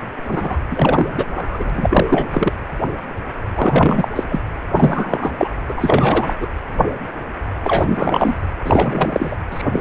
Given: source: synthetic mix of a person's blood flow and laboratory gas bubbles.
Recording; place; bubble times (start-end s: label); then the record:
Doppler ultrasound of blood flow; precordium
0.28-0.56 s: bubbles
0.71-1.25 s: bubbles
1.35-1.70 s: bubbles
1.74-2.52 s: bubbles
3.55-4.08 s: bubbles
4.16-4.24 s: bubbles
4.29-4.41 s: bubbles
4.74-5.33 s: bubbles
5.38-5.50 s: bubbles
5.68-5.74 s: bubbles
5.77-6.35 s: bubbles
6.41-6.48 s: bubbles
7.64-8.35 s: bubbles
8.63-9.38 s: bubbles
9.50-9.62 s: bubbles
9.72-9.81 s: bubbles
From the record:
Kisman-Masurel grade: 333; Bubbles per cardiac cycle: rolling drumbeat, 9 or more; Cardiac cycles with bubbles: 50 to 99%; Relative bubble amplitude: loud (0.450 to 0.775); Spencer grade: 3 (all of the cardiac periods contain showers or single bubble signals, but not dominating or overriding the cardiac motion signals); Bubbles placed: anywhere in the cardiac cycle